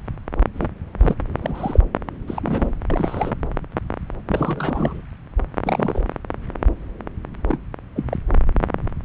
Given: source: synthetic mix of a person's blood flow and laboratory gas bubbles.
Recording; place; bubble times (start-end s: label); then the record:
Doppler ultrasound of blood flow; subclavian vein
0.54-0.68 s: bubbles
0.99-1.15 s: bubbles
1.38-1.79 s: bubbles
2.27-2.68 s: bubbles
2.90-3.35 s: bubbles
4.28-5.02 s: bubbles
5.63-6.04 s: bubbles
7.48-7.58 s: bubbles
7.96-8.05 s: bubbles
8.09-8.17 s: bubbles
From the record:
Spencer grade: 3 (all of the cardiac periods contain showers or single bubble signals, but not dominating or overriding the cardiac motion signals); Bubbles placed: anywhere in the cardiac cycle